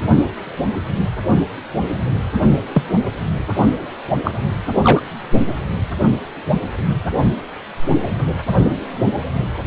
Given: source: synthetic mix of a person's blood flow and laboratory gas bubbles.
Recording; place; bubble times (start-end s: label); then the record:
Doppler ultrasound of blood flow; precordium
2.73-2.83 s: bubbles
4.24-4.32 s: bubbles
4.82-5.03 s: bubbles
From the record:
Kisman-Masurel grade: 123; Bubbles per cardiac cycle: 1 to 2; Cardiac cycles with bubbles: 10 to 50%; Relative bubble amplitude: loud (0.450 to 0.775); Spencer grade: 2 (many but less than half of the cardiac periods contain bubble signals, singularly or in groups); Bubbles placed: anywhere in the cardiac cycle